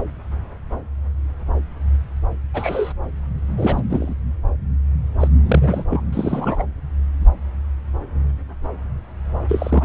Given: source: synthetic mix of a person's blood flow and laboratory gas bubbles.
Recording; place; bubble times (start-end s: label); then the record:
Doppler ultrasound of blood flow; subclavian vein
2.53-2.93 s: bubbles
3.57-3.82 s: bubbles
3.90-4.15 s: bubbles
5.20-5.28 s: bubbles
5.46-5.83 s: bubbles
5.90-6.03 s: bubbles
6.12-6.63 s: bubbles
9.49-9.85 s: bubbles
From the record:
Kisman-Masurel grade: 222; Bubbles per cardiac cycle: several, 3 to 8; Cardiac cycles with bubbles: 10 to 50%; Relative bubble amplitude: moderate (0.250 to 0.450); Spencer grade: 2 (many but less than half of the cardiac periods contain bubble signals, singularly or in groups); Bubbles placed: anywhere in the cardiac cycle